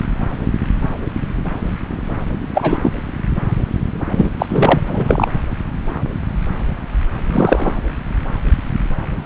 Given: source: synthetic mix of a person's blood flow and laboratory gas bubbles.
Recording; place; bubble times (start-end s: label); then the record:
Doppler ultrasound of blood flow; subclavian vein
2.54-2.78 s: bubbles
2.83-2.92 s: bubbles
4.11-4.30 s: bubbles
4.38-4.46 s: bubbles
4.49-4.80 s: bubbles
4.87-5.28 s: bubbles
7.32-7.77 s: bubbles
From the record:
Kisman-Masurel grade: 223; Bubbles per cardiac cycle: several, 3 to 8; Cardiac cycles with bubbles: 10 to 50%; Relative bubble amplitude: loud (0.450 to 0.775); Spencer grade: 2 (many but less than half of the cardiac periods contain bubble signals, singularly or in groups); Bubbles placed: anywhere in the cardiac cycle